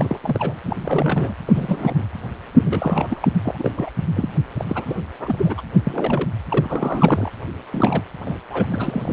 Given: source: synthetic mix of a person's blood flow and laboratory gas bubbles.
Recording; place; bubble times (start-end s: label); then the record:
Doppler ultrasound of blood flow; precordium
0.00-0.54 s: bubbles
0.64-0.77 s: bubbles
0.81-1.34 s: bubbles
1.47-2.05 s: bubbles
2.52-3.28 s: bubbles
3.43-3.71 s: bubbles
3.75-3.91 s: bubbles
4.14-4.29 s: bubbles
4.58-4.64 s: bubbles
4.67-5.01 s: bubbles
5.19-5.54 s: bubbles
5.57-5.62 s: bubbles
5.87-6.30 s: bubbles
6.48-7.31 s: bubbles
7.72-8.04 s: bubbles
8.25-8.38 s: bubbles
8.50-8.66 s: bubbles
8.71-9.13 s: bubbles
From the record:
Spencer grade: 3 (all of the cardiac periods contain showers or single bubble signals, but not dominating or overriding the cardiac motion signals); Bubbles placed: anywhere in the cardiac cycle